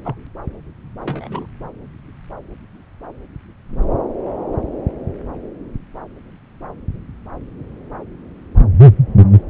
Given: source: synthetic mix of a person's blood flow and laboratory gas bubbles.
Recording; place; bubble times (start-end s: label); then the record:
Doppler ultrasound of blood flow; subclavian vein
0.04-0.15 s: bubbles
1.01-1.47 s: bubbles
From the record:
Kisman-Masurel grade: 211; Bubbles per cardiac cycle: several, 3 to 8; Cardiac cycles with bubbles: 1 to 10%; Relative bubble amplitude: barely perceptible (0.100 to 0.250); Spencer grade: 1 (occasional bubble signal discernible with the cardiac motion signal, with majority of cardiac periods free of bubbles); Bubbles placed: anywhere in the cardiac cycle